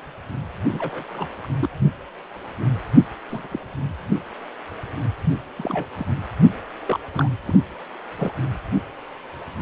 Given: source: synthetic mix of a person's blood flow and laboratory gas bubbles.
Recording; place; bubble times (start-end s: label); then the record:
Doppler ultrasound of blood flow; precordium
0.72-1.03 s: bubbles
1.09-1.27 s: bubbles
1.43-1.47 s: bubbles
1.59-1.69 s: bubbles
3.30-3.48 s: bubbles
3.51-3.60 s: bubbles
5.56-5.85 s: bubbles
5.96-6.06 s: bubbles
6.86-7.00 s: bubbles
7.13-7.29 s: bubbles
7.47-7.62 s: bubbles
8.19-8.32 s: bubbles
From the record:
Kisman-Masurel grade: 221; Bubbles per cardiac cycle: several, 3 to 8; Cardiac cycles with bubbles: 10 to 50%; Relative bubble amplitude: barely perceptible (0.100 to 0.250); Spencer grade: 2 (many but less than half of the cardiac periods contain bubble signals, singularly or in groups); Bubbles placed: only in the low amplitude regions of the cardiac cycle